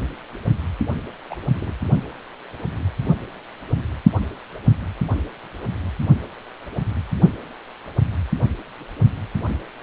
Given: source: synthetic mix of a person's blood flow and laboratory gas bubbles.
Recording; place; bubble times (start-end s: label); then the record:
Doppler ultrasound of blood flow; precordium
1.30-1.35 s: bubbles
1.54-1.74 s: bubbles
From the record:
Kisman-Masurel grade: 211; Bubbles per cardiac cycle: several, 3 to 8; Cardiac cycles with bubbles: 1 to 10%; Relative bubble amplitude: barely perceptible (0.100 to 0.250); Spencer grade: 1 (occasional bubble signal discernible with the cardiac motion signal, with majority of cardiac periods free of bubbles); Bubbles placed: only in the low amplitude regions of the cardiac cycle